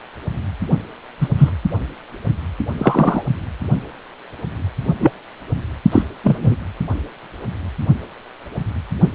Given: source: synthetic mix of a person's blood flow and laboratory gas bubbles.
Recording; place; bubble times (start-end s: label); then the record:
Doppler ultrasound of blood flow; precordium
1.21-1.28 s: bubbles
1.38-1.51 s: bubbles
2.77-3.23 s: bubbles
5.00-5.12 s: bubbles
5.92-6.02 s: bubbles
6.24-6.55 s: bubbles
From the record:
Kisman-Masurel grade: 123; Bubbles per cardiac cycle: 1 to 2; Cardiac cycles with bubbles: 10 to 50%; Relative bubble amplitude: loud (0.450 to 0.775); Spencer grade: 2 (many but less than half of the cardiac periods contain bubble signals, singularly or in groups); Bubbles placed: only in the low amplitude regions of the cardiac cycle